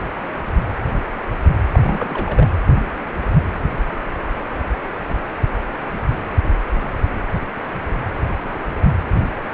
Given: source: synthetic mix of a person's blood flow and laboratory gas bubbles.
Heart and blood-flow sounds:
Doppler ultrasound of blood flow; precordium
1.72-2.50 s: bubbles
From the record:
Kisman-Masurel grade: 211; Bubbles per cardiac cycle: several, 3 to 8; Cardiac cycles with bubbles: 1 to 10%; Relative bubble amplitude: barely perceptible (0.100 to 0.250); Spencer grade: 1 (occasional bubble signal discernible with the cardiac motion signal, with majority of cardiac periods free of bubbles); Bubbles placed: anywhere in the cardiac cycle

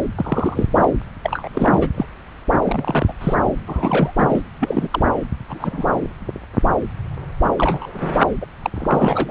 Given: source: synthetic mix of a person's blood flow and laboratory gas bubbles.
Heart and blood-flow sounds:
Doppler ultrasound of blood flow; subclavian vein
0.15-0.67 s: bubbles
0.76-0.89 s: bubbles
1.23-1.89 s: bubbles
1.94-2.06 s: bubbles
2.65-3.12 s: bubbles
3.21-3.35 s: bubbles
3.67-4.13 s: bubbles
4.17-4.43 s: bubbles
4.59-4.88 s: bubbles
4.90-5.02 s: bubbles
5.48-5.93 s: bubbles
7.44-7.90 s: bubbles
7.93-8.15 s: bubbles
8.40-8.46 s: bubbles
8.62-8.70 s: bubbles
8.75-9.31 s: bubbles
From the record:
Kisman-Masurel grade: 232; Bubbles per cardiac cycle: several, 3 to 8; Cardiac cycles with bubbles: 50 to 99%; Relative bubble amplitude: moderate (0.250 to 0.450); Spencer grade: 3 (all of the cardiac periods contain showers or single bubble signals, but not dominating or overriding the cardiac motion signals); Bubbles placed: anywhere in the cardiac cycle

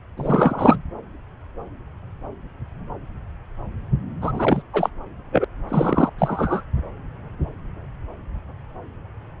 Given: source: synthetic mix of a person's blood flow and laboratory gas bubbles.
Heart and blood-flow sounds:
Doppler ultrasound of blood flow; subclavian vein
0.17-0.78 s: bubbles
4.21-4.62 s: bubbles
4.73-4.89 s: bubbles
5.31-5.44 s: bubbles
5.68-6.09 s: bubbles
6.18-6.61 s: bubbles
From the record:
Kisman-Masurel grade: 223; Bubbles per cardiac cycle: several, 3 to 8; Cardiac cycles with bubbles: 10 to 50%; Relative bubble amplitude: loud (0.450 to 0.775); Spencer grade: 2 (many but less than half of the cardiac periods contain bubble signals, singularly or in groups); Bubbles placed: anywhere in the cardiac cycle

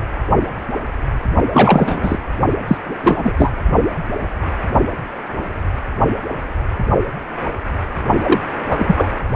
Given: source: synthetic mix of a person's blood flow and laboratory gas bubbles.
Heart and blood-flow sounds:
Doppler ultrasound of blood flow; precordium
1.53-2.18 s: bubbles
2.67-2.77 s: bubbles
2.86-2.94 s: bubbles
3.02-3.35 s: bubbles
3.38-3.53 s: bubbles
8.23-8.39 s: bubbles
8.68-9.08 s: bubbles
From the record:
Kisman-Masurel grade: 223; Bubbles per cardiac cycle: several, 3 to 8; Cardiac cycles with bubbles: 10 to 50%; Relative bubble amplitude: loud (0.450 to 0.775); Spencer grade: 2 (many but less than half of the cardiac periods contain bubble signals, singularly or in groups); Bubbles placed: only in the low amplitude regions of the cardiac cycle

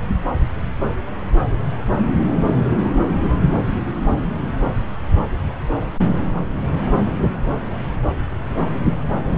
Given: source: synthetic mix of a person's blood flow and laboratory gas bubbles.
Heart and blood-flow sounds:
Doppler ultrasound of blood flow; subclavian vein
no bubbles
From the record:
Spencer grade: 0 (complete lack of bubble signals)

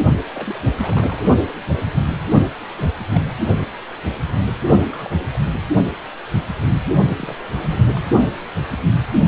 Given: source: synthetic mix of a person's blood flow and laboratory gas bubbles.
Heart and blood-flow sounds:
Doppler ultrasound of blood flow; precordium
0.34-0.59 s: bubbles
0.78-1.23 s: bubbles
2.75-2.88 s: bubbles
3.13-3.23 s: bubbles
4.89-5.11 s: bubbles
5.31-5.41 s: bubbles
7.16-8.02 s: bubbles
From the record:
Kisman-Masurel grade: 221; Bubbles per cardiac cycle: several, 3 to 8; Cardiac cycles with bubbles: 10 to 50%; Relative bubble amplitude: barely perceptible (0.100 to 0.250); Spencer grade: 2 (many but less than half of the cardiac periods contain bubble signals, singularly or in groups); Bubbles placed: only in the low amplitude regions of the cardiac cycle

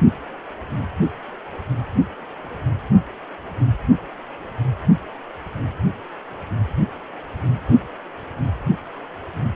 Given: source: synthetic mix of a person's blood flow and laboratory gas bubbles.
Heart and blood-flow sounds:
Doppler ultrasound of blood flow; precordium
no bubbles
From the record:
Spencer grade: 0 (complete lack of bubble signals)

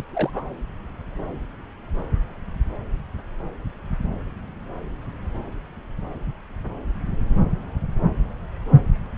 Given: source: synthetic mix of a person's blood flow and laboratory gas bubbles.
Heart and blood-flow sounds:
Doppler ultrasound of blood flow; subclavian vein
0.00-0.04 s: bubbles
0.13-0.44 s: bubbles
From the record:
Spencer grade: 1 (occasional bubble signal discernible with the cardiac motion signal, with majority of cardiac periods free of bubbles); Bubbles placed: anywhere in the cardiac cycle

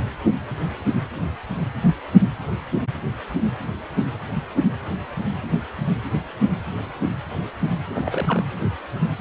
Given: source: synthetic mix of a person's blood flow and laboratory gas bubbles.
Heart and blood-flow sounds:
Doppler ultrasound of blood flow; precordium
7.89-8.42 s: bubbles
From the record:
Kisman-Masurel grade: 211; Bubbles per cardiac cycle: several, 3 to 8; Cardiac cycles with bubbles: 1 to 10%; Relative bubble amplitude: barely perceptible (0.100 to 0.250); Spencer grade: 1 (occasional bubble signal discernible with the cardiac motion signal, with majority of cardiac periods free of bubbles); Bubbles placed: anywhere in the cardiac cycle

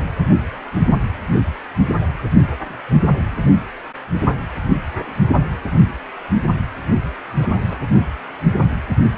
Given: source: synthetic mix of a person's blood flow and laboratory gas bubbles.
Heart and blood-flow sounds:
Doppler ultrasound of blood flow; precordium
7.40-7.84 s: bubbles
From the record:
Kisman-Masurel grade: 111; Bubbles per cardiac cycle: 1 to 2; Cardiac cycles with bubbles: 1 to 10%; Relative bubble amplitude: barely perceptible (0.100 to 0.250); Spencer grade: 1 (occasional bubble signal discernible with the cardiac motion signal, with majority of cardiac periods free of bubbles); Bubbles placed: only in the low amplitude regions of the cardiac cycle

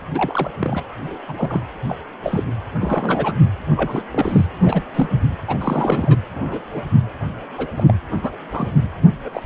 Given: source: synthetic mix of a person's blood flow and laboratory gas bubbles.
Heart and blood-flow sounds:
Doppler ultrasound of blood flow; precordium
0.14-0.51 s: bubbles
0.59-0.82 s: bubbles
1.04-1.17 s: bubbles
1.27-1.61 s: bubbles
1.88-1.96 s: bubbles
2.23-2.44 s: bubbles
2.81-3.33 s: bubbles
3.77-4.03 s: bubbles
4.11-4.46 s: bubbles
4.61-4.83 s: bubbles
4.95-5.20 s: bubbles
5.47-5.57 s: bubbles
5.59-6.18 s: bubbles
6.34-6.61 s: bubbles
6.73-6.83 s: bubbles
7.58-7.67 s: bubbles
7.76-7.84 s: bubbles
7.88-7.94 s: bubbles
8.16-8.31 s: bubbles
8.51-8.69 s: bubbles
9.24-9.43 s: bubbles
From the record:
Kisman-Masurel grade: 242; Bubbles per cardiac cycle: several, 3 to 8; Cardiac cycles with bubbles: 100%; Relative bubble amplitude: moderate (0.250 to 0.450); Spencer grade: 3 (all of the cardiac periods contain showers or single bubble signals, but not dominating or overriding the cardiac motion signals); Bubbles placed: anywhere in the cardiac cycle

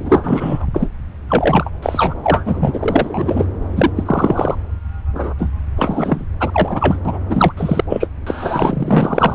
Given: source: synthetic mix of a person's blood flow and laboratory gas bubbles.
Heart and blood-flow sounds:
Doppler ultrasound of blood flow; subclavian vein
0.00-0.66 s: bubbles
0.74-0.87 s: bubbles
1.29-1.71 s: bubbles
1.82-2.14 s: bubbles
2.23-3.46 s: bubbles
3.76-3.91 s: bubbles
3.96-4.55 s: bubbles
5.15-5.33 s: bubbles
5.38-5.50 s: bubbles
5.76-6.25 s: bubbles
6.40-6.99 s: bubbles
7.05-7.19 s: bubbles
7.29-7.53 s: bubbles
7.57-7.84 s: bubbles
7.89-8.07 s: bubbles
8.27-9.35 s: bubbles
From the record:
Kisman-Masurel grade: 343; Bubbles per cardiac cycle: rolling drumbeat, 9 or more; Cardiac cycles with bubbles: 100%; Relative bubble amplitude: loud (0.450 to 0.775); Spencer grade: 3 (all of the cardiac periods contain showers or single bubble signals, but not dominating or overriding the cardiac motion signals); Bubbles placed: anywhere in the cardiac cycle

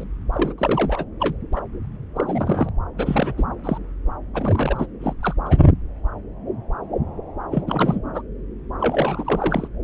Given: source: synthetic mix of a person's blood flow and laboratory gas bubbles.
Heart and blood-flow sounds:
Doppler ultrasound of blood flow; subclavian vein
0.00-0.04 s: bubbles
0.33-0.54 s: bubbles
0.58-1.06 s: bubbles
1.19-1.35 s: bubbles
1.52-1.61 s: bubbles
2.16-2.69 s: bubbles
2.97-3.33 s: bubbles
3.37-3.44 s: bubbles
3.64-3.78 s: bubbles
4.34-4.86 s: bubbles
5.00-5.13 s: bubbles
5.21-5.34 s: bubbles
5.46-5.58 s: bubbles
7.51-7.63 s: bubbles
7.67-7.99 s: bubbles
8.14-8.21 s: bubbles
8.79-9.67 s: bubbles
From the record:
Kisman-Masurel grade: 332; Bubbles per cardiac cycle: rolling drumbeat, 9 or more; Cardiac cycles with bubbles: 50 to 99%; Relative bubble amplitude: moderate (0.250 to 0.450); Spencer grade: 3 (all of the cardiac periods contain showers or single bubble signals, but not dominating or overriding the cardiac motion signals); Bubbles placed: anywhere in the cardiac cycle

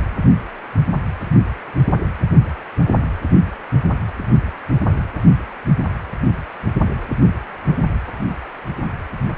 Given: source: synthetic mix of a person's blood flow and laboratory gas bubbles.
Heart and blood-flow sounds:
Doppler ultrasound of blood flow; precordium
no bubbles
From the record:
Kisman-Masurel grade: 000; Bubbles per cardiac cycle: 0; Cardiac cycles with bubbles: 0%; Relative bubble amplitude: no bubbles discernible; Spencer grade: 0 (complete lack of bubble signals)

